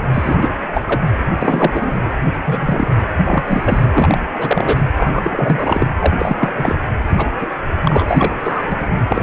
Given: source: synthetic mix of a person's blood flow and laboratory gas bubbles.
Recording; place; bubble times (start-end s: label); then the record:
Doppler ultrasound of blood flow; precordium
0.13-0.54 s: bubbles
0.74-1.00 s: bubbles
1.40-1.93 s: bubbles
2.44-2.89 s: bubbles
3.23-3.86 s: bubbles
3.93-4.18 s: bubbles
4.38-4.79 s: bubbles
4.97-5.87 s: bubbles
5.99-6.13 s: bubbles
6.18-6.92 s: bubbles
7.10-7.26 s: bubbles
7.41-7.46 s: bubbles
7.84-8.04 s: bubbles
8.07-8.36 s: bubbles
8.43-8.87 s: bubbles
9.10-9.22 s: bubbles
From the record:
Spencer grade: 3 (all of the cardiac periods contain showers or single bubble signals, but not dominating or overriding the cardiac motion signals); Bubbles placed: anywhere in the cardiac cycle